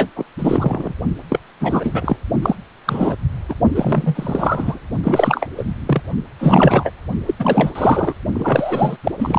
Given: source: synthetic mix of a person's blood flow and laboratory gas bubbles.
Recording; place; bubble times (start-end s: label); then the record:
Doppler ultrasound of blood flow; precordium
0.00-0.11 s: bubbles
0.15-0.24 s: bubbles
0.39-0.93 s: bubbles
1.29-1.39 s: bubbles
1.60-2.17 s: bubbles
2.42-2.56 s: bubbles
2.85-3.16 s: bubbles
3.49-3.54 s: bubbles
3.76-4.78 s: bubbles
5.03-5.46 s: bubbles
5.57-5.63 s: bubbles
5.85-6.01 s: bubbles
6.39-6.90 s: bubbles
7.26-7.34 s: bubbles
7.39-7.71 s: bubbles
7.75-8.14 s: bubbles
8.35-8.97 s: bubbles
9.04-9.12 s: bubbles
9.18-9.39 s: bubbles
From the record:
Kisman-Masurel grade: 343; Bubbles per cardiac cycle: rolling drumbeat, 9 or more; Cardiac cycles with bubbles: 100%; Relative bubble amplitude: loud (0.450 to 0.775); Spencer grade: 3 (all of the cardiac periods contain showers or single bubble signals, but not dominating or overriding the cardiac motion signals); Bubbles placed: only in the low amplitude regions of the cardiac cycle